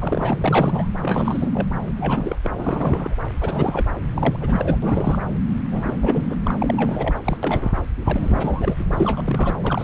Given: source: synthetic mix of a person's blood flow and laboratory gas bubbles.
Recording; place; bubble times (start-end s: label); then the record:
Doppler ultrasound of blood flow; subclavian vein
0.00-0.36 s: bubbles
0.41-0.87 s: bubbles
1.01-1.67 s: bubbles
1.96-2.36 s: bubbles
2.43-2.50 s: bubbles
2.56-3.15 s: bubbles
3.41-3.87 s: bubbles
4.15-4.38 s: bubbles
4.40-4.78 s: bubbles
4.82-5.19 s: bubbles
5.71-5.97 s: bubbles
6.01-6.36 s: bubbles
6.43-6.54 s: bubbles
6.58-7.14 s: bubbles
7.23-7.37 s: bubbles
7.43-7.72 s: bubbles
8.04-8.83 s: bubbles
8.92-9.52 s: bubbles
9.63-9.84 s: bubbles
From the record:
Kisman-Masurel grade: 342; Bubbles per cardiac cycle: rolling drumbeat, 9 or more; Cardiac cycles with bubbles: 100%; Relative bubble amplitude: moderate (0.250 to 0.450); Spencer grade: 3 (all of the cardiac periods contain showers or single bubble signals, but not dominating or overriding the cardiac motion signals); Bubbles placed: anywhere in the cardiac cycle